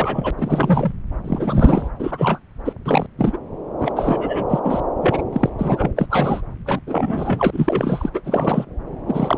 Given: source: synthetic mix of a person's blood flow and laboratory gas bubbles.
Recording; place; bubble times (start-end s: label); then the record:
Doppler ultrasound of blood flow; subclavian vein
0.00-0.31 s: bubbles
0.38-0.92 s: bubbles
1.24-1.89 s: bubbles
1.99-2.39 s: bubbles
2.65-2.73 s: bubbles
2.85-3.06 s: bubbles
3.18-3.38 s: bubbles
3.78-3.92 s: bubbles
3.96-4.45 s: bubbles
4.49-4.59 s: bubbles
4.63-4.80 s: bubbles
5.01-5.22 s: bubbles
5.33-5.50 s: bubbles
5.58-5.91 s: bubbles
5.96-6.07 s: bubbles
6.09-6.42 s: bubbles
6.66-6.80 s: bubbles
6.87-8.10 s: bubbles
8.13-8.21 s: bubbles
8.24-8.66 s: bubbles
9.07-9.38 s: bubbles
From the record:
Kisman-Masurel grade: 343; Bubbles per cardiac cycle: rolling drumbeat, 9 or more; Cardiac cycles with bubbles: 100%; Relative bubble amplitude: loud (0.450 to 0.775); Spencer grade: 3 (all of the cardiac periods contain showers or single bubble signals, but not dominating or overriding the cardiac motion signals); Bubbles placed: anywhere in the cardiac cycle